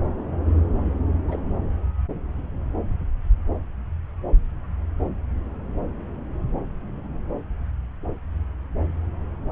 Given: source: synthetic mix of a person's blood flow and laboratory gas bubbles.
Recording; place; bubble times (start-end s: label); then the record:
Doppler ultrasound of blood flow; subclavian vein
1.28-1.39 s: bubbles
From the record:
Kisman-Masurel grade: 111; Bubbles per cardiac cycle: 1 to 2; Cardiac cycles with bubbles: 1 to 10%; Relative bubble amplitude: barely perceptible (0.100 to 0.250); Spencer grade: 1 (occasional bubble signal discernible with the cardiac motion signal, with majority of cardiac periods free of bubbles); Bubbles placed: anywhere in the cardiac cycle